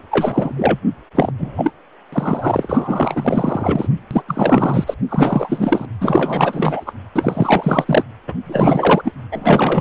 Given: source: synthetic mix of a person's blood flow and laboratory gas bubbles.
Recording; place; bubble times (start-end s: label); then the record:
Doppler ultrasound of blood flow; precordium
0.11-0.54 s: bubbles
0.56-0.80 s: bubbles
1.15-1.31 s: bubbles
1.38-1.71 s: bubbles
2.12-3.88 s: bubbles
4.10-4.22 s: bubbles
4.27-4.95 s: bubbles
5.08-5.87 s: bubbles
6.00-6.92 s: bubbles
7.16-8.04 s: bubbles
8.28-8.34 s: bubbles
8.45-9.12 s: bubbles
9.32-9.81 s: bubbles
From the record:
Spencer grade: 4 (maximum detectable bubble signal sounding continuously throughout systole and diastole of every cardiac period, and overriding the amplitude of the normal cardiac signals); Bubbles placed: anywhere in the cardiac cycle